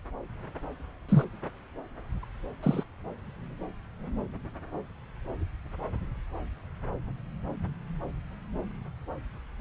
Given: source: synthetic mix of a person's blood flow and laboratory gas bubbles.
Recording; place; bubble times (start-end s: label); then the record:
Doppler ultrasound of blood flow; subclavian vein
1.08-1.25 s: bubbles
2.22-2.25 s: bubbles
2.62-2.83 s: bubbles
From the record:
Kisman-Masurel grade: 122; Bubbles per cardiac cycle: 1 to 2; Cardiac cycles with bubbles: 10 to 50%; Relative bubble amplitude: moderate (0.250 to 0.450); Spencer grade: 2 (many but less than half of the cardiac periods contain bubble signals, singularly or in groups); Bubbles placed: anywhere in the cardiac cycle